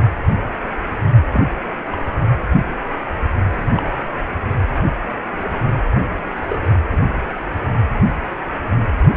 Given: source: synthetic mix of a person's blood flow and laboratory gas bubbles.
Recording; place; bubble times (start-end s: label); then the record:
Doppler ultrasound of blood flow; precordium
1.33-1.44 s: bubbles
1.92-2.06 s: bubbles
3.73-3.83 s: bubbles
6.49-6.71 s: bubbles
6.91-6.98 s: bubbles
From the record:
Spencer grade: 2 (many but less than half of the cardiac periods contain bubble signals, singularly or in groups); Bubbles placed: anywhere in the cardiac cycle